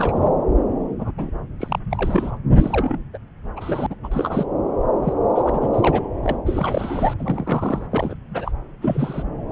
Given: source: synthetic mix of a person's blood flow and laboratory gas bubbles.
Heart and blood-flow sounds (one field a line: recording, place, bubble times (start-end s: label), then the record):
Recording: Doppler ultrasound of blood flow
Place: subclavian vein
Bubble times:
0.00-0.31 s: bubbles
0.99-1.11 s: bubbles
1.18-1.30 s: bubbles
1.59-1.79 s: bubbles
1.91-2.37 s: bubbles
2.57-2.98 s: bubbles
3.13-3.18 s: bubbles
3.56-3.87 s: bubbles
3.90-3.95 s: bubbles
4.03-4.08 s: bubbles
4.11-4.46 s: bubbles
5.02-5.13 s: bubbles
5.35-5.69 s: bubbles
5.73-6.02 s: bubbles
6.23-6.38 s: bubbles
6.46-7.14 s: bubbles
7.19-7.87 s: bubbles
7.91-8.16 s: bubbles
8.30-8.52 s: bubbles
8.81-9.23 s: bubbles
From the record:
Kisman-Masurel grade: 342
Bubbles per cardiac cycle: rolling drumbeat, 9 or more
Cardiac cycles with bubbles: 100%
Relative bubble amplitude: moderate (0.250 to 0.450)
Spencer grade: 3 (all of the cardiac periods contain showers or single bubble signals, but not dominating or overriding the cardiac motion signals)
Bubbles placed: anywhere in the cardiac cycle